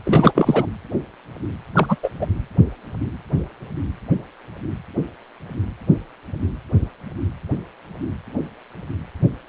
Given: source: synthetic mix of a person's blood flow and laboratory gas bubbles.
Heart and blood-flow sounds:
Doppler ultrasound of blood flow; precordium
0.05-0.32 s: bubbles
0.34-0.66 s: bubbles
1.75-1.96 s: bubbles
2.03-2.10 s: bubbles
2.21-2.26 s: bubbles
From the record:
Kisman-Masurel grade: 223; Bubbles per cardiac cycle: several, 3 to 8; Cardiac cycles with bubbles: 10 to 50%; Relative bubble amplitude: loud (0.450 to 0.775); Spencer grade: 2 (many but less than half of the cardiac periods contain bubble signals, singularly or in groups); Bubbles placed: anywhere in the cardiac cycle

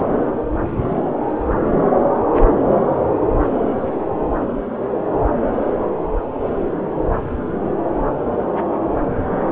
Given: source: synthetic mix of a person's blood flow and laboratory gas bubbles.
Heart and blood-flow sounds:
Doppler ultrasound of blood flow; subclavian vein
0.00-0.03 s: bubbles
From the record:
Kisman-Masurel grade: 212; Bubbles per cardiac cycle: several, 3 to 8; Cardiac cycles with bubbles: 1 to 10%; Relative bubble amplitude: moderate (0.250 to 0.450); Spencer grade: 1 (occasional bubble signal discernible with the cardiac motion signal, with majority of cardiac periods free of bubbles); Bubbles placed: anywhere in the cardiac cycle

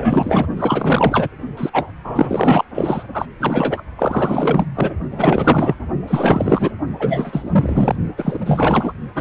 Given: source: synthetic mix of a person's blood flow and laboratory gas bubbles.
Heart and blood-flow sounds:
Doppler ultrasound of blood flow; precordium
0.00-0.47 s: bubbles
0.56-1.28 s: bubbles
1.57-1.70 s: bubbles
1.72-1.86 s: bubbles
2.04-2.65 s: bubbles
2.75-3.04 s: bubbles
3.14-3.26 s: bubbles
3.39-3.82 s: bubbles
3.96-4.65 s: bubbles
4.75-4.93 s: bubbles
5.10-5.75 s: bubbles
6.07-6.72 s: bubbles
6.99-7.96 s: bubbles
8.16-8.93 s: bubbles
9.14-9.21 s: bubbles
From the record:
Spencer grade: 4 (maximum detectable bubble signal sounding continuously throughout systole and diastole of every cardiac period, and overriding the amplitude of the normal cardiac signals); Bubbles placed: only in the low amplitude regions of the cardiac cycle

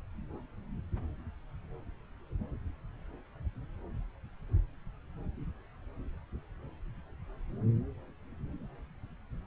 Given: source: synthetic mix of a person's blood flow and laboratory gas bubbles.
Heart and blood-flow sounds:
Doppler ultrasound of blood flow; subclavian vein
no bubbles
From the record:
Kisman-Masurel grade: 000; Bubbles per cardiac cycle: 0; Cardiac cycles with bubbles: 0%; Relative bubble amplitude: no bubbles discernible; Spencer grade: 0 (complete lack of bubble signals)

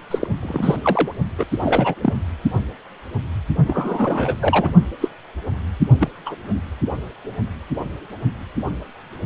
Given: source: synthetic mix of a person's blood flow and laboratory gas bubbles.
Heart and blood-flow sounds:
Doppler ultrasound of blood flow; precordium
0.11-0.28 s: bubbles
0.42-0.77 s: bubbles
0.82-1.12 s: bubbles
1.38-1.46 s: bubbles
1.61-1.95 s: bubbles
2.01-2.13 s: bubbles
3.67-4.35 s: bubbles
4.40-4.72 s: bubbles
5.01-5.08 s: bubbles
5.99-6.09 s: bubbles
6.25-6.35 s: bubbles
From the record:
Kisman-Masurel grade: 232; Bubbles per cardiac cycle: several, 3 to 8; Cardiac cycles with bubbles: 50 to 99%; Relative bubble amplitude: moderate (0.250 to 0.450); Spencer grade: 3 (all of the cardiac periods contain showers or single bubble signals, but not dominating or overriding the cardiac motion signals); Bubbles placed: only in the low amplitude regions of the cardiac cycle

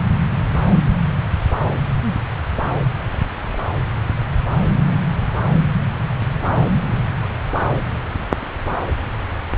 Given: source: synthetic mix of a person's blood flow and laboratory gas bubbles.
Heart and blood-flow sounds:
Doppler ultrasound of blood flow; subclavian vein
3.50-3.59 s: bubbles
4.12-4.25 s: bubbles
From the record:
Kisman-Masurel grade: 111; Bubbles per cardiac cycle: 1 to 2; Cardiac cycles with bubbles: 1 to 10%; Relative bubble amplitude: barely perceptible (0.100 to 0.250); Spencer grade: 1 (occasional bubble signal discernible with the cardiac motion signal, with majority of cardiac periods free of bubbles); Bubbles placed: anywhere in the cardiac cycle

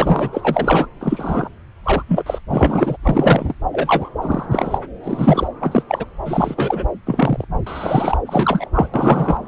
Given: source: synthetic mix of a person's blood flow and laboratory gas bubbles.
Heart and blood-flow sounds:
Doppler ultrasound of blood flow; subclavian vein
0.00-0.86 s: bubbles
1.00-1.49 s: bubbles
1.83-2.03 s: bubbles
2.08-2.39 s: bubbles
2.48-2.97 s: bubbles
3.03-3.55 s: bubbles
3.73-4.09 s: bubbles
4.21-4.46 s: bubbles
4.51-4.79 s: bubbles
5.03-5.48 s: bubbles
5.60-5.83 s: bubbles
5.88-6.05 s: bubbles
6.25-6.84 s: bubbles
7.06-7.44 s: bubbles
7.66-8.17 s: bubbles
8.26-8.68 s: bubbles
8.74-8.88 s: bubbles
8.94-9.38 s: bubbles
From the record:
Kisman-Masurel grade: 243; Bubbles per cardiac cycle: several, 3 to 8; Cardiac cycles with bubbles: 100%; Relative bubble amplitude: loud (0.450 to 0.775); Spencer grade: 3 (all of the cardiac periods contain showers or single bubble signals, but not dominating or overriding the cardiac motion signals); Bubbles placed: anywhere in the cardiac cycle

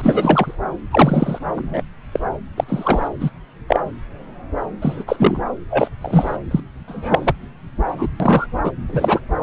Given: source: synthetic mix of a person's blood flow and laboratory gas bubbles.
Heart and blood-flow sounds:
Doppler ultrasound of blood flow; subclavian vein
0.00-0.55 s: bubbles
0.91-1.39 s: bubbles
1.54-1.82 s: bubbles
2.12-2.20 s: bubbles
2.57-2.64 s: bubbles
2.68-3.08 s: bubbles
3.20-3.30 s: bubbles
3.68-3.80 s: bubbles
4.82-5.04 s: bubbles
5.07-5.41 s: bubbles
5.70-5.88 s: bubbles
6.00-6.37 s: bubbles
6.50-6.60 s: bubbles
6.88-7.35 s: bubbles
7.86-8.10 s: bubbles
8.20-8.46 s: bubbles
8.63-8.71 s: bubbles
8.88-9.20 s: bubbles
From the record:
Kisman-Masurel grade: 233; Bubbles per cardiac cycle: several, 3 to 8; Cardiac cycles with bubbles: 50 to 99%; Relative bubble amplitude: loud (0.450 to 0.775); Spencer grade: 3 (all of the cardiac periods contain showers or single bubble signals, but not dominating or overriding the cardiac motion signals); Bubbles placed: anywhere in the cardiac cycle

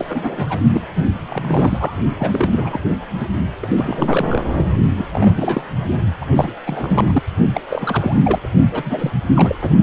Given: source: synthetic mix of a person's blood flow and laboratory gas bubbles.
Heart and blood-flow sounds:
Doppler ultrasound of blood flow; precordium
0.00-0.60 s: bubbles
0.73-0.81 s: bubbles
0.95-1.05 s: bubbles
1.28-1.94 s: bubbles
2.19-2.81 s: bubbles
2.90-2.98 s: bubbles
3.19-3.27 s: bubbles
3.62-3.67 s: bubbles
3.77-4.44 s: bubbles
4.54-4.63 s: bubbles
4.95-5.66 s: bubbles
6.21-6.26 s: bubbles
6.36-6.54 s: bubbles
6.66-7.23 s: bubbles
7.54-7.61 s: bubbles
7.70-8.20 s: bubbles
8.24-8.39 s: bubbles
8.43-8.47 s: bubbles
8.71-9.11 s: bubbles
9.34-9.55 s: bubbles
9.62-9.70 s: bubbles
From the record:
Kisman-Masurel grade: 342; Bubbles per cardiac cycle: rolling drumbeat, 9 or more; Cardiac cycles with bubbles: 100%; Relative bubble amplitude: moderate (0.250 to 0.450); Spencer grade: 3 (all of the cardiac periods contain showers or single bubble signals, but not dominating or overriding the cardiac motion signals); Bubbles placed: only in the low amplitude regions of the cardiac cycle

